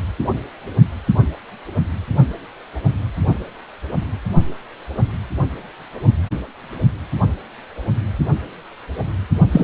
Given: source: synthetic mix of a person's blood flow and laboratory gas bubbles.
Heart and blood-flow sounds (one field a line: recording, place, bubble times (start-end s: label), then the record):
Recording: Doppler ultrasound of blood flow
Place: precordium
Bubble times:
9.53-9.64 s: bubbles
From the record:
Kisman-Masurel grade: 223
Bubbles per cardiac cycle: several, 3 to 8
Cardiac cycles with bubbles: 10 to 50%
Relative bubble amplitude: loud (0.450 to 0.775)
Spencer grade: 2 (many but less than half of the cardiac periods contain bubble signals, singularly or in groups)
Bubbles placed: only in the low amplitude regions of the cardiac cycle